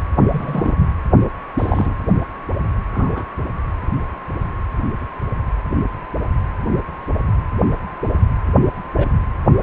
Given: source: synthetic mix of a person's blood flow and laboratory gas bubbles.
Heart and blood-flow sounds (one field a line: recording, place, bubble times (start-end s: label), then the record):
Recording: Doppler ultrasound of blood flow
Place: precordium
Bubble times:
0.31-0.74 s: bubbles
1.58-1.95 s: bubbles
2.93-3.25 s: bubbles
8.96-9.08 s: bubbles
From the record:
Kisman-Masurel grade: 122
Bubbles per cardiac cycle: 1 to 2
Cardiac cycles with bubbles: 10 to 50%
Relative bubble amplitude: moderate (0.250 to 0.450)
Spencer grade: 2 (many but less than half of the cardiac periods contain bubble signals, singularly or in groups)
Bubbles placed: anywhere in the cardiac cycle